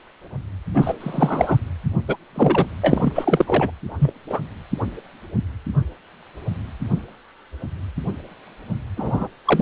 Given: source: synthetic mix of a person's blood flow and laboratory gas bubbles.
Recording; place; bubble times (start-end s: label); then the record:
Doppler ultrasound of blood flow; precordium
0.73-0.94 s: bubbles
1.00-1.57 s: bubbles
2.07-2.17 s: bubbles
2.34-2.67 s: bubbles
2.83-3.71 s: bubbles
3.99-4.13 s: bubbles
4.29-4.40 s: bubbles
8.96-9.28 s: bubbles
9.45-9.62 s: bubbles
From the record:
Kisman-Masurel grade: 232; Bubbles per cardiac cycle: several, 3 to 8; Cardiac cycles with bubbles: 50 to 99%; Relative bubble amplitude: moderate (0.250 to 0.450); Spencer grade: 3 (all of the cardiac periods contain showers or single bubble signals, but not dominating or overriding the cardiac motion signals); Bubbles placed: anywhere in the cardiac cycle